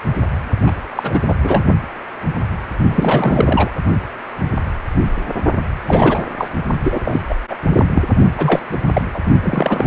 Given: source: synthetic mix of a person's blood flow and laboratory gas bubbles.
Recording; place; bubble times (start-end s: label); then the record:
Doppler ultrasound of blood flow; precordium
0.66-0.71 s: bubbles
0.96-1.19 s: bubbles
1.28-1.34 s: bubbles
1.42-1.63 s: bubbles
2.90-3.71 s: bubbles
5.87-6.23 s: bubbles
6.37-6.49 s: bubbles
6.83-7.22 s: bubbles
7.29-7.34 s: bubbles
7.49-7.55 s: bubbles
7.75-7.87 s: bubbles
7.94-8.03 s: bubbles
8.38-8.61 s: bubbles
8.71-8.77 s: bubbles
8.93-9.02 s: bubbles
9.14-9.20 s: bubbles
9.43-9.87 s: bubbles
From the record:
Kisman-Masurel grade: 333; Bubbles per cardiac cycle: rolling drumbeat, 9 or more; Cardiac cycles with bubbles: 50 to 99%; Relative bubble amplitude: loud (0.450 to 0.775); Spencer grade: 3 (all of the cardiac periods contain showers or single bubble signals, but not dominating or overriding the cardiac motion signals); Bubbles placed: only in the low amplitude regions of the cardiac cycle